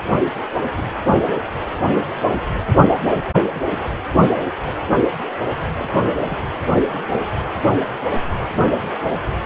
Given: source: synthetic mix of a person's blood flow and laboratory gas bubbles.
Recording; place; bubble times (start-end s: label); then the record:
Doppler ultrasound of blood flow; precordium
0.77-0.83 s: bubbles
2.90-2.98 s: bubbles
3.54-3.60 s: bubbles
5.78-5.92 s: bubbles
6.22-6.42 s: bubbles
7.70-7.84 s: bubbles
From the record:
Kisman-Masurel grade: 121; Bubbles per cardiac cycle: 1 to 2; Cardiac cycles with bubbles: 10 to 50%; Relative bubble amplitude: barely perceptible (0.100 to 0.250); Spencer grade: 2 (many but less than half of the cardiac periods contain bubble signals, singularly or in groups); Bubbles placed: anywhere in the cardiac cycle